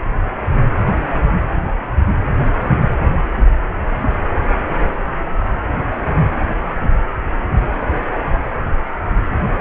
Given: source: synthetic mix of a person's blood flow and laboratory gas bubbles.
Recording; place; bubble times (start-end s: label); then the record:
Doppler ultrasound of blood flow; precordium
2.42-2.71 s: bubbles
From the record:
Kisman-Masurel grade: 111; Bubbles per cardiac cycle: 1 to 2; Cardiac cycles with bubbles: 1 to 10%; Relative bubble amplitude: barely perceptible (0.100 to 0.250); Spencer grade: 1 (occasional bubble signal discernible with the cardiac motion signal, with majority of cardiac periods free of bubbles); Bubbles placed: anywhere in the cardiac cycle